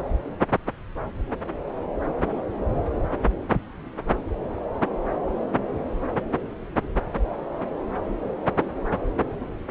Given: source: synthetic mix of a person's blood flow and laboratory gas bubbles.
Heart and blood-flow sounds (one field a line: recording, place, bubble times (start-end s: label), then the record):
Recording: Doppler ultrasound of blood flow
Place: subclavian vein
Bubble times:
no bubbles
From the record:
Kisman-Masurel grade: 000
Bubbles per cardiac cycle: 0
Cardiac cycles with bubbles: 0%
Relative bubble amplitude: no bubbles discernible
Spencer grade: 0 (complete lack of bubble signals)